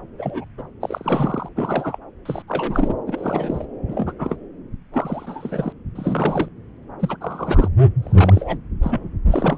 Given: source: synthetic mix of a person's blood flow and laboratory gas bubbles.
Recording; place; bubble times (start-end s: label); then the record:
Doppler ultrasound of blood flow; subclavian vein
0.18-0.44 s: bubbles
0.57-0.62 s: bubbles
0.81-1.49 s: bubbles
1.56-1.98 s: bubbles
2.25-2.42 s: bubbles
2.48-2.94 s: bubbles
3.06-3.65 s: bubbles
3.88-4.12 s: bubbles
4.19-4.37 s: bubbles
4.94-5.73 s: bubbles
5.95-6.49 s: bubbles
7.00-7.17 s: bubbles
7.21-7.68 s: bubbles
8.02-8.58 s: bubbles
8.82-9.09 s: bubbles
9.31-9.57 s: bubbles
From the record:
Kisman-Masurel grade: 242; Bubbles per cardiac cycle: several, 3 to 8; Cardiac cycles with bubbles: 100%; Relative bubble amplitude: moderate (0.250 to 0.450); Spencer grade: 3 (all of the cardiac periods contain showers or single bubble signals, but not dominating or overriding the cardiac motion signals); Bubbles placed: anywhere in the cardiac cycle